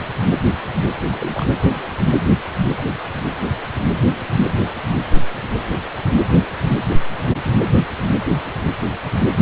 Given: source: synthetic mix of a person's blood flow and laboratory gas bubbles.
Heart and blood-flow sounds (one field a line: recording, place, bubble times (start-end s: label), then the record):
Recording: Doppler ultrasound of blood flow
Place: precordium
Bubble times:
1.10-1.44 s: bubbles
2.02-2.07 s: bubbles
From the record:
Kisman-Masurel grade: 121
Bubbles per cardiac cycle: 1 to 2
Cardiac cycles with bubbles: 10 to 50%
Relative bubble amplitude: barely perceptible (0.100 to 0.250)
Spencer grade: 2 (many but less than half of the cardiac periods contain bubble signals, singularly or in groups)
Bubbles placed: only in the low amplitude regions of the cardiac cycle